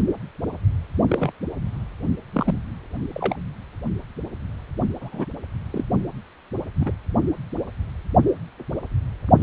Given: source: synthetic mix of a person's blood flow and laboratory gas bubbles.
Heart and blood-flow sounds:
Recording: Doppler ultrasound of blood flow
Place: precordium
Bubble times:
1.09-1.31 s: bubbles
2.33-2.54 s: bubbles
3.13-3.36 s: bubbles
5.00-5.25 s: bubbles
5.72-5.84 s: bubbles
6.80-6.92 s: bubbles
From the record:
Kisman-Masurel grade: 122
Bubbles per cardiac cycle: 1 to 2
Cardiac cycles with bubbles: 10 to 50%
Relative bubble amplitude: moderate (0.250 to 0.450)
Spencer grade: 2 (many but less than half of the cardiac periods contain bubble signals, singularly or in groups)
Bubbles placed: only in the low amplitude regions of the cardiac cycle

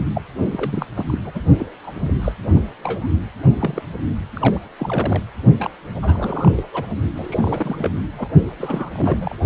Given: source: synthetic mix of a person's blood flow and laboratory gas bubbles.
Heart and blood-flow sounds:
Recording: Doppler ultrasound of blood flow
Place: precordium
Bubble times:
0.00-0.04 s: bubbles
0.15-0.21 s: bubbles
0.51-0.86 s: bubbles
0.95-1.18 s: bubbles
1.24-1.31 s: bubbles
1.34-1.41 s: bubbles
1.59-1.66 s: bubbles
1.82-2.12 s: bubbles
2.22-2.32 s: bubbles
2.83-3.08 s: bubbles
3.59-3.83 s: bubbles
4.34-4.60 s: bubbles
4.79-5.23 s: bubbles
5.59-5.71 s: bubbles
6.02-6.65 s: bubbles
6.73-6.87 s: bubbles
7.14-7.91 s: bubbles
8.18-8.28 s: bubbles
8.58-8.89 s: bubbles
8.93-9.35 s: bubbles
From the record:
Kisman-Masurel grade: 242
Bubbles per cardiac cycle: several, 3 to 8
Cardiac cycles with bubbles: 100%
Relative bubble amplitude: moderate (0.250 to 0.450)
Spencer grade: 3 (all of the cardiac periods contain showers or single bubble signals, but not dominating or overriding the cardiac motion signals)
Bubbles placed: only in the low amplitude regions of the cardiac cycle

